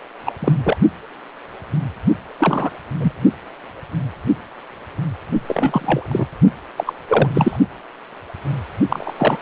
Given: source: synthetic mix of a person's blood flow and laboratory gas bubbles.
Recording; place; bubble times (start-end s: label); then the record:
Doppler ultrasound of blood flow; precordium
0.26-0.32 s: bubbles
0.39-0.53 s: bubbles
0.63-0.77 s: bubbles
2.39-2.70 s: bubbles
3.00-3.12 s: bubbles
5.48-6.27 s: bubbles
6.76-6.84 s: bubbles
6.87-6.93 s: bubbles
7.08-7.30 s: bubbles
7.33-7.58 s: bubbles
8.88-9.13 s: bubbles
9.17-9.38 s: bubbles
From the record:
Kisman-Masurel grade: 223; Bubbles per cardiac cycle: several, 3 to 8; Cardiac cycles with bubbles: 10 to 50%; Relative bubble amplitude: loud (0.450 to 0.775); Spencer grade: 2 (many but less than half of the cardiac periods contain bubble signals, singularly or in groups); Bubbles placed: only in the low amplitude regions of the cardiac cycle